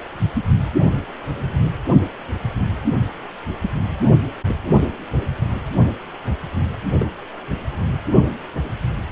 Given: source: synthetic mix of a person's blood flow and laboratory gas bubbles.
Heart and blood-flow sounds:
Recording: Doppler ultrasound of blood flow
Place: precordium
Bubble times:
7.00-7.09 s: bubbles
From the record:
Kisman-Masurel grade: 122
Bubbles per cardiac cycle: 1 to 2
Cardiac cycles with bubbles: 10 to 50%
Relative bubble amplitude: moderate (0.250 to 0.450)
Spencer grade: 2 (many but less than half of the cardiac periods contain bubble signals, singularly or in groups)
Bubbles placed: anywhere in the cardiac cycle

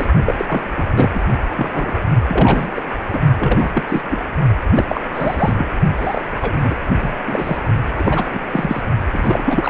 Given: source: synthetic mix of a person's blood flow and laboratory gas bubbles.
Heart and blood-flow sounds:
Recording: Doppler ultrasound of blood flow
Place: precordium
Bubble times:
0.00-0.06 s: bubbles
0.26-0.35 s: bubbles
0.38-0.62 s: bubbles
0.76-0.84 s: bubbles
0.95-1.21 s: bubbles
1.56-2.01 s: bubbles
2.29-2.72 s: bubbles
2.75-2.83 s: bubbles
3.08-3.20 s: bubbles
3.39-3.72 s: bubbles
3.75-3.84 s: bubbles
3.88-4.02 s: bubbles
4.10-4.19 s: bubbles
4.75-4.85 s: bubbles
4.88-5.00 s: bubbles
5.13-5.66 s: bubbles
5.97-6.21 s: bubbles
6.40-6.57 s: bubbles
6.61-6.75 s: bubbles
7.02-7.17 s: bubbles
7.27-7.58 s: bubbles
7.96-8.40 s: bubbles
8.52-8.84 s: bubbles
9.12-9.70 s: bubbles
From the record:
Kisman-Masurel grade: 343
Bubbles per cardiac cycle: rolling drumbeat, 9 or more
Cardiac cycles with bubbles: 100%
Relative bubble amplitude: loud (0.450 to 0.775)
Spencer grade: 3 (all of the cardiac periods contain showers or single bubble signals, but not dominating or overriding the cardiac motion signals)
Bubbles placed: only in the low amplitude regions of the cardiac cycle

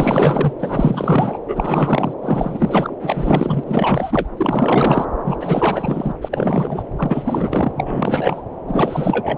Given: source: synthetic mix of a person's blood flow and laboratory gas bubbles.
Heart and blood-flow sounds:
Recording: Doppler ultrasound of blood flow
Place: subclavian vein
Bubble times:
0.00-0.53 s: bubbles
0.59-1.39 s: bubbles
1.48-2.13 s: bubbles
2.21-2.94 s: bubbles
3.01-3.64 s: bubbles
3.66-4.28 s: bubbles
4.37-5.05 s: bubbles
5.24-5.37 s: bubbles
5.41-6.12 s: bubbles
6.21-6.83 s: bubbles
6.96-7.72 s: bubbles
7.75-8.42 s: bubbles
8.67-9.37 s: bubbles
From the record:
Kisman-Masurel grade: 444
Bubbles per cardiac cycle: continuous sound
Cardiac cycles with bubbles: 100%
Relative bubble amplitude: maximal (0.775 to 0.999)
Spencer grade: 4 (maximum detectable bubble signal sounding continuously throughout systole and diastole of every cardiac period, and overriding the amplitude of the normal cardiac signals)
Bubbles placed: anywhere in the cardiac cycle

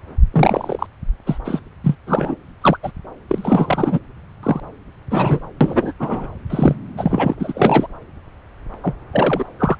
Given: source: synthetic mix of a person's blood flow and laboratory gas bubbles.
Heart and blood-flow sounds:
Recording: Doppler ultrasound of blood flow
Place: subclavian vein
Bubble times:
0.33-0.86 s: bubbles
1.26-1.38 s: bubbles
1.45-1.60 s: bubbles
1.83-1.96 s: bubbles
2.06-2.35 s: bubbles
2.61-2.77 s: bubbles
2.83-2.92 s: bubbles
3.28-4.00 s: bubbles
4.43-4.60 s: bubbles
5.10-5.39 s: bubbles
5.60-5.93 s: bubbles
6.00-6.29 s: bubbles
6.50-6.75 s: bubbles
6.97-7.34 s: bubbles
7.39-7.87 s: bubbles
8.83-8.94 s: bubbles
9.12-9.44 s: bubbles
9.59-9.77 s: bubbles
From the record:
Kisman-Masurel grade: 233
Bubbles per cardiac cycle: several, 3 to 8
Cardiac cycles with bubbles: 50 to 99%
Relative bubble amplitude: loud (0.450 to 0.775)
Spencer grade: 3 (all of the cardiac periods contain showers or single bubble signals, but not dominating or overriding the cardiac motion signals)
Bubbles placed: anywhere in the cardiac cycle

